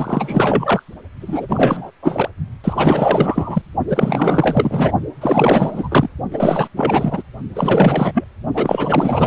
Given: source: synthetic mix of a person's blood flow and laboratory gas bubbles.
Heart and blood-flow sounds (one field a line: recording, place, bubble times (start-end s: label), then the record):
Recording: Doppler ultrasound of blood flow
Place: precordium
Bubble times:
0.00-0.83 s: bubbles
1.21-1.91 s: bubbles
2.02-2.29 s: bubbles
2.64-3.62 s: bubbles
3.89-4.92 s: bubbles
5.21-6.09 s: bubbles
6.32-6.68 s: bubbles
6.76-7.23 s: bubbles
7.55-8.25 s: bubbles
8.54-9.27 s: bubbles
From the record:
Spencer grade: 4 (maximum detectable bubble signal sounding continuously throughout systole and diastole of every cardiac period, and overriding the amplitude of the normal cardiac signals)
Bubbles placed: only in the low amplitude regions of the cardiac cycle